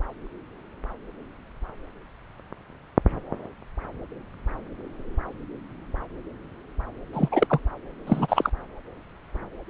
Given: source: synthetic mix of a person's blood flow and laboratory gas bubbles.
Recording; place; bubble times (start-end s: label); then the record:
Doppler ultrasound of blood flow; subclavian vein
7.13-7.28 s: bubbles
7.31-7.47 s: bubbles
7.49-7.60 s: bubbles
8.07-8.50 s: bubbles
From the record:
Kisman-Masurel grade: 222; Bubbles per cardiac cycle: several, 3 to 8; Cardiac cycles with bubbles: 10 to 50%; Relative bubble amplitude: moderate (0.250 to 0.450); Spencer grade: 2 (many but less than half of the cardiac periods contain bubble signals, singularly or in groups); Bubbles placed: anywhere in the cardiac cycle